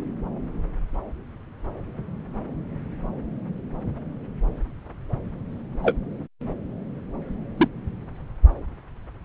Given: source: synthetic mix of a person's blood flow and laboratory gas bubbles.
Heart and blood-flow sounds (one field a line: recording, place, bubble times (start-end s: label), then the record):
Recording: Doppler ultrasound of blood flow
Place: subclavian vein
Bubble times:
5.83-5.95 s: bubbles
7.57-7.68 s: bubbles
From the record:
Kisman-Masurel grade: 122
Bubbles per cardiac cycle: 1 to 2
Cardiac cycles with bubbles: 10 to 50%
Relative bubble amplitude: moderate (0.250 to 0.450)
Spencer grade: 2 (many but less than half of the cardiac periods contain bubble signals, singularly or in groups)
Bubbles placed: anywhere in the cardiac cycle